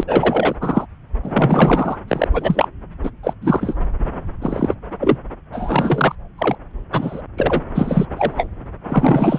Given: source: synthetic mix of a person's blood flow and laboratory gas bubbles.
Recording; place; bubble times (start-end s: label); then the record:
Doppler ultrasound of blood flow; subclavian vein
0.00-0.03 s: bubbles
0.07-0.56 s: bubbles
0.60-0.86 s: bubbles
1.23-1.97 s: bubbles
2.07-2.28 s: bubbles
2.33-2.68 s: bubbles
3.03-3.10 s: bubbles
3.23-3.33 s: bubbles
3.41-3.76 s: bubbles
4.42-4.75 s: bubbles
5.00-5.17 s: bubbles
5.52-6.16 s: bubbles
6.38-6.55 s: bubbles
6.92-7.21 s: bubbles
7.37-7.62 s: bubbles
7.75-8.06 s: bubbles
8.16-8.47 s: bubbles
8.88-9.39 s: bubbles
From the record:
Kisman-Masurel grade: 243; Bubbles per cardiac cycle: several, 3 to 8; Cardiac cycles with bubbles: 100%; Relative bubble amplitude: loud (0.450 to 0.775); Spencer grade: 3 (all of the cardiac periods contain showers or single bubble signals, but not dominating or overriding the cardiac motion signals); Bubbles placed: anywhere in the cardiac cycle